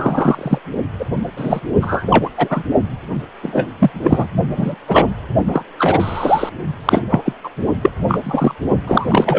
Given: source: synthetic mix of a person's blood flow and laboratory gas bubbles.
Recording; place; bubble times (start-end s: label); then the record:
Doppler ultrasound of blood flow; precordium
0.00-0.58 s: bubbles
0.99-1.05 s: bubbles
1.36-1.61 s: bubbles
1.81-2.30 s: bubbles
2.37-2.63 s: bubbles
3.42-3.69 s: bubbles
3.79-3.91 s: bubbles
4.01-4.27 s: bubbles
4.56-4.75 s: bubbles
4.88-5.08 s: bubbles
5.48-5.63 s: bubbles
5.77-6.50 s: bubbles
6.85-7.06 s: bubbles
7.09-7.33 s: bubbles
7.43-7.49 s: bubbles
7.82-7.91 s: bubbles
8.08-8.21 s: bubbles
8.23-8.54 s: bubbles
8.87-9.39 s: bubbles
From the record:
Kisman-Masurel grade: 233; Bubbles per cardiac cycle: several, 3 to 8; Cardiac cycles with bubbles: 50 to 99%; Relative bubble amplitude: loud (0.450 to 0.775); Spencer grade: 3 (all of the cardiac periods contain showers or single bubble signals, but not dominating or overriding the cardiac motion signals); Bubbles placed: only in the low amplitude regions of the cardiac cycle